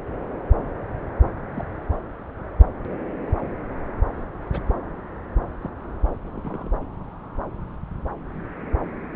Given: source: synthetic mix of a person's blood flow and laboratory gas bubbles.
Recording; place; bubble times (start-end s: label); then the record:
Doppler ultrasound of blood flow; subclavian vein
1.52-1.65 s: bubbles
4.49-4.59 s: bubbles
5.61-5.69 s: bubbles
6.33-6.70 s: bubbles
From the record:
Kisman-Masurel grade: 121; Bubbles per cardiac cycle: 1 to 2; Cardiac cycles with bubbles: 10 to 50%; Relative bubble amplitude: barely perceptible (0.100 to 0.250); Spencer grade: 2 (many but less than half of the cardiac periods contain bubble signals, singularly or in groups); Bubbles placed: anywhere in the cardiac cycle